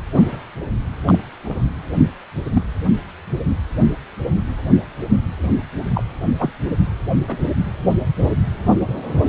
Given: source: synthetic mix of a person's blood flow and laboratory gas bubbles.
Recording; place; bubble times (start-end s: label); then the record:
Doppler ultrasound of blood flow; precordium
0.14-0.43 s: bubbles
1.05-1.19 s: bubbles
1.45-1.62 s: bubbles
2.44-2.63 s: bubbles
5.41-5.52 s: bubbles
5.93-6.03 s: bubbles
6.39-6.50 s: bubbles
7.27-7.38 s: bubbles
From the record:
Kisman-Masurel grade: 122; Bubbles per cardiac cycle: 1 to 2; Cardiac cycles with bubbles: 10 to 50%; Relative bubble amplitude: moderate (0.250 to 0.450); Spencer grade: 2 (many but less than half of the cardiac periods contain bubble signals, singularly or in groups); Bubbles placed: anywhere in the cardiac cycle